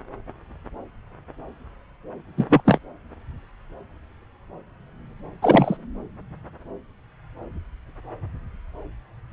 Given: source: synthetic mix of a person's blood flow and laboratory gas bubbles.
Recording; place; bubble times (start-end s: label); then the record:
Doppler ultrasound of blood flow; subclavian vein
2.37-2.46 s: bubbles
2.50-2.62 s: bubbles
2.65-2.79 s: bubbles
5.42-5.77 s: bubbles
From the record:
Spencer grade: 2 (many but less than half of the cardiac periods contain bubble signals, singularly or in groups); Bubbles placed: anywhere in the cardiac cycle